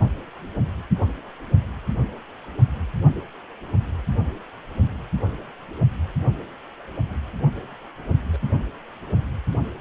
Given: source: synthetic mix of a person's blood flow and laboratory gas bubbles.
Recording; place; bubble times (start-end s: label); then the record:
Doppler ultrasound of blood flow; precordium
8.33-8.37 s: bubbles
From the record:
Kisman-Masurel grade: 111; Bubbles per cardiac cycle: 1 to 2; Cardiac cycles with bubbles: 1 to 10%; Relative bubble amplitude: barely perceptible (0.100 to 0.250); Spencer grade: 1 (occasional bubble signal discernible with the cardiac motion signal, with majority of cardiac periods free of bubbles); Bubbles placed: only in the low amplitude regions of the cardiac cycle